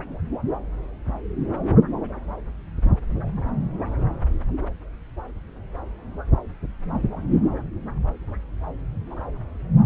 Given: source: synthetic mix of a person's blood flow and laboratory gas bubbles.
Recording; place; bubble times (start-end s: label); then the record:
Doppler ultrasound of blood flow; subclavian vein
no bubbles
From the record:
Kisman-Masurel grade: 000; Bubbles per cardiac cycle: 0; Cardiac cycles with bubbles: 0%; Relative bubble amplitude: no bubbles discernible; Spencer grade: 0 (complete lack of bubble signals)